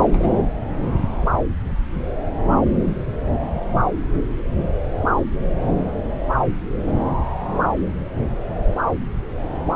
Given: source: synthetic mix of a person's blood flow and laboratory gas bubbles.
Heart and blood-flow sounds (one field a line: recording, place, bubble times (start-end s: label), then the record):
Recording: Doppler ultrasound of blood flow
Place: subclavian vein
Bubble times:
0.00-0.33 s: bubbles
From the record:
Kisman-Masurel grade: 211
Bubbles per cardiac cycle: several, 3 to 8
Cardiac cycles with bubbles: 1 to 10%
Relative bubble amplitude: barely perceptible (0.100 to 0.250)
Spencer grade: 1 (occasional bubble signal discernible with the cardiac motion signal, with majority of cardiac periods free of bubbles)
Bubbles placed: anywhere in the cardiac cycle